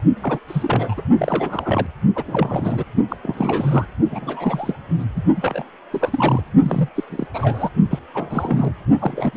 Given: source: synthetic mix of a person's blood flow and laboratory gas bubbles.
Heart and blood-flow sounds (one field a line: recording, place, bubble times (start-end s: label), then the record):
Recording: Doppler ultrasound of blood flow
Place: precordium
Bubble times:
0.21-0.39 s: bubbles
0.47-1.02 s: bubbles
1.17-1.86 s: bubbles
2.15-2.23 s: bubbles
2.27-2.84 s: bubbles
3.08-3.16 s: bubbles
3.22-3.85 s: bubbles
4.11-4.75 s: bubbles
4.98-5.04 s: bubbles
5.16-5.22 s: bubbles
5.36-5.64 s: bubbles
5.92-6.43 s: bubbles
6.62-6.89 s: bubbles
6.96-7.04 s: bubbles
7.10-7.27 s: bubbles
7.33-7.69 s: bubbles
7.90-7.99 s: bubbles
8.14-8.73 s: bubbles
8.99-9.37 s: bubbles
From the record:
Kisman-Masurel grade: 342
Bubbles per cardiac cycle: rolling drumbeat, 9 or more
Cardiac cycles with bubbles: 100%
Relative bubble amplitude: moderate (0.250 to 0.450)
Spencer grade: 3 (all of the cardiac periods contain showers or single bubble signals, but not dominating or overriding the cardiac motion signals)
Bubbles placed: only in the low amplitude regions of the cardiac cycle